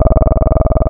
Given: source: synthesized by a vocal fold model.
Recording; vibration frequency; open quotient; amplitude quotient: sustained vowel; 20 Hz; 0.3; 1.2